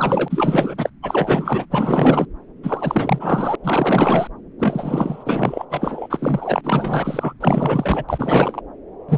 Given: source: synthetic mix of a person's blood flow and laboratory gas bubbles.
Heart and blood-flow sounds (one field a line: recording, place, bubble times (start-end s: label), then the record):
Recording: Doppler ultrasound of blood flow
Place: subclavian vein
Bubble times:
0.00-0.90 s: bubbles
1.02-1.66 s: bubbles
1.70-2.25 s: bubbles
2.63-3.55 s: bubbles
3.64-4.28 s: bubbles
4.58-5.66 s: bubbles
5.70-6.61 s: bubbles
6.64-7.33 s: bubbles
7.40-8.04 s: bubbles
8.09-8.62 s: bubbles
9.09-9.18 s: bubbles
From the record:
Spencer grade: 4 (maximum detectable bubble signal sounding continuously throughout systole and diastole of every cardiac period, and overriding the amplitude of the normal cardiac signals)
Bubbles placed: anywhere in the cardiac cycle